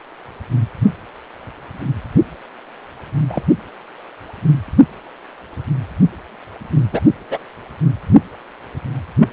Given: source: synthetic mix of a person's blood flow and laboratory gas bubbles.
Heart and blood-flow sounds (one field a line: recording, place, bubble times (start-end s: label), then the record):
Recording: Doppler ultrasound of blood flow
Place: precordium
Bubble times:
3.29-3.42 s: bubbles
6.92-7.01 s: bubbles
7.29-7.43 s: bubbles
9.19-9.29 s: bubbles
From the record:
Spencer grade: 2 (many but less than half of the cardiac periods contain bubble signals, singularly or in groups)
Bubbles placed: anywhere in the cardiac cycle